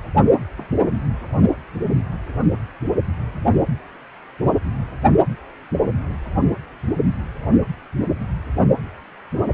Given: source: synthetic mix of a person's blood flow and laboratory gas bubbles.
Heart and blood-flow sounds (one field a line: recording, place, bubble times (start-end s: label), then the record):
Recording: Doppler ultrasound of blood flow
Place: precordium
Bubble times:
0.57-0.70 s: bubbles
From the record:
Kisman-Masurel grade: 111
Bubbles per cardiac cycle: 1 to 2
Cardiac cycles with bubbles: 1 to 10%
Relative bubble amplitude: barely perceptible (0.100 to 0.250)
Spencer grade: 1 (occasional bubble signal discernible with the cardiac motion signal, with majority of cardiac periods free of bubbles)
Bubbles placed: only in the low amplitude regions of the cardiac cycle